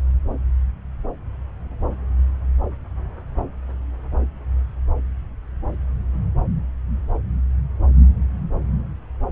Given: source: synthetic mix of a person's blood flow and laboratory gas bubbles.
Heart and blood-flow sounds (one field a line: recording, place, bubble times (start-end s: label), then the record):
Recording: Doppler ultrasound of blood flow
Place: subclavian vein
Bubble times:
no bubbles
From the record:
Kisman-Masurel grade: 000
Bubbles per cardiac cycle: 0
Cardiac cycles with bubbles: 0%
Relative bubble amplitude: no bubbles discernible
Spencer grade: 0 (complete lack of bubble signals)